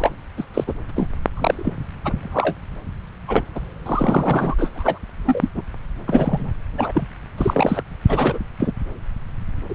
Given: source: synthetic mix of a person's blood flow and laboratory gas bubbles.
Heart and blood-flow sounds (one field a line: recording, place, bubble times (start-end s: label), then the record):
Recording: Doppler ultrasound of blood flow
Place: subclavian vein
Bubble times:
0.00-0.10 s: bubbles
0.37-0.45 s: bubbles
0.54-0.64 s: bubbles
0.67-0.73 s: bubbles
0.89-0.91 s: bubbles
0.96-1.07 s: bubbles
1.33-1.76 s: bubbles
2.04-2.12 s: bubbles
2.18-2.54 s: bubbles
3.27-3.42 s: bubbles
3.54-3.60 s: bubbles
3.85-4.55 s: bubbles
4.58-4.70 s: bubbles
4.75-4.98 s: bubbles
5.25-5.48 s: bubbles
5.54-5.62 s: bubbles
6.06-6.51 s: bubbles
6.77-7.07 s: bubbles
7.38-7.82 s: bubbles
8.08-8.38 s: bubbles
8.60-8.73 s: bubbles
9.69-9.74 s: bubbles
From the record:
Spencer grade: 3 (all of the cardiac periods contain showers or single bubble signals, but not dominating or overriding the cardiac motion signals)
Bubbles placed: anywhere in the cardiac cycle